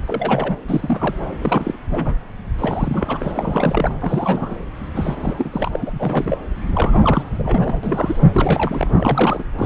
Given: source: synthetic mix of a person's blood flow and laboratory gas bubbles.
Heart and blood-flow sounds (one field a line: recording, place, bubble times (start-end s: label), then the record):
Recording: Doppler ultrasound of blood flow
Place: subclavian vein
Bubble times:
0.00-0.04 s: bubbles
0.07-0.57 s: bubbles
0.68-1.15 s: bubbles
1.41-1.77 s: bubbles
1.90-2.15 s: bubbles
2.58-3.94 s: bubbles
4.00-4.54 s: bubbles
4.95-5.49 s: bubbles
5.52-5.78 s: bubbles
5.81-5.92 s: bubbles
5.96-6.37 s: bubbles
6.73-7.23 s: bubbles
7.33-7.80 s: bubbles
7.83-8.25 s: bubbles
8.33-8.90 s: bubbles
8.97-9.43 s: bubbles
9.59-9.66 s: bubbles
From the record:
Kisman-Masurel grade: 342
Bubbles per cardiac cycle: rolling drumbeat, 9 or more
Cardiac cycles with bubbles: 100%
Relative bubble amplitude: moderate (0.250 to 0.450)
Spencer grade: 3 (all of the cardiac periods contain showers or single bubble signals, but not dominating or overriding the cardiac motion signals)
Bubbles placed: anywhere in the cardiac cycle